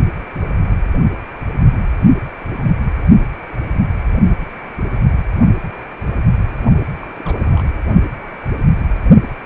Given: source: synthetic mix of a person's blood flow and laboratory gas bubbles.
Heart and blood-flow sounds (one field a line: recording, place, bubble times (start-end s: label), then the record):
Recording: Doppler ultrasound of blood flow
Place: precordium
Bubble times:
7.03-7.07 s: bubbles
7.18-7.81 s: bubbles
From the record:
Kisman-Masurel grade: 211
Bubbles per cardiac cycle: several, 3 to 8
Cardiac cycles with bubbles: 1 to 10%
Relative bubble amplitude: barely perceptible (0.100 to 0.250)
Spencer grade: 1 (occasional bubble signal discernible with the cardiac motion signal, with majority of cardiac periods free of bubbles)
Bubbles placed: only in the low amplitude regions of the cardiac cycle